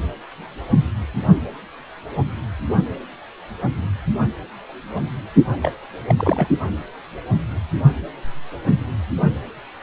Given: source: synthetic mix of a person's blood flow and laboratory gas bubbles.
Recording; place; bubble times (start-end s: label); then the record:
Doppler ultrasound of blood flow; precordium
5.62-5.72 s: bubbles
6.08-6.48 s: bubbles
From the record:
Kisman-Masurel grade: 212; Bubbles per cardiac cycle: several, 3 to 8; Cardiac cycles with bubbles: 1 to 10%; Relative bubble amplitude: moderate (0.250 to 0.450); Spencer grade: 1 (occasional bubble signal discernible with the cardiac motion signal, with majority of cardiac periods free of bubbles); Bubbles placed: only in the low amplitude regions of the cardiac cycle